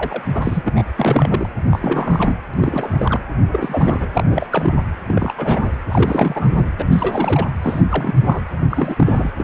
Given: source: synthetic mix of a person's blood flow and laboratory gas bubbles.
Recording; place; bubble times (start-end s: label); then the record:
Doppler ultrasound of blood flow; precordium
0.00-0.23 s: bubbles
0.34-0.82 s: bubbles
0.96-1.49 s: bubbles
1.70-2.39 s: bubbles
2.54-3.20 s: bubbles
3.52-4.10 s: bubbles
4.14-4.47 s: bubbles
4.51-4.75 s: bubbles
5.06-5.33 s: bubbles
5.37-5.70 s: bubbles
5.89-6.52 s: bubbles
6.57-6.64 s: bubbles
6.79-6.84 s: bubbles
6.90-7.47 s: bubbles
7.62-8.14 s: bubbles
8.26-8.41 s: bubbles
8.71-9.30 s: bubbles
9.38-9.44 s: bubbles
From the record:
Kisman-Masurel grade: 342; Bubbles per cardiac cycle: rolling drumbeat, 9 or more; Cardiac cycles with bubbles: 100%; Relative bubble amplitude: moderate (0.250 to 0.450); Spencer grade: 3 (all of the cardiac periods contain showers or single bubble signals, but not dominating or overriding the cardiac motion signals); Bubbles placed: anywhere in the cardiac cycle